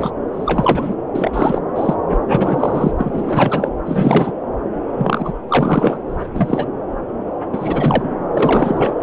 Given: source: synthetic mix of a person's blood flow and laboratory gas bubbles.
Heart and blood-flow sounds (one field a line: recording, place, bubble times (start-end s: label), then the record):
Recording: Doppler ultrasound of blood flow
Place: subclavian vein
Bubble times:
0.00-0.10 s: bubbles
0.33-0.96 s: bubbles
1.15-1.61 s: bubbles
1.75-1.94 s: bubbles
2.11-2.16 s: bubbles
2.27-2.92 s: bubbles
2.99-3.70 s: bubbles
3.86-4.32 s: bubbles
4.97-5.33 s: bubbles
5.49-5.97 s: bubbles
6.09-6.30 s: bubbles
6.34-6.67 s: bubbles
7.53-8.13 s: bubbles
8.33-8.94 s: bubbles
From the record:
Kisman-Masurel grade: 333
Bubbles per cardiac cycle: rolling drumbeat, 9 or more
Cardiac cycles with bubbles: 50 to 99%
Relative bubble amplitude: loud (0.450 to 0.775)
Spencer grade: 3 (all of the cardiac periods contain showers or single bubble signals, but not dominating or overriding the cardiac motion signals)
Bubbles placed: anywhere in the cardiac cycle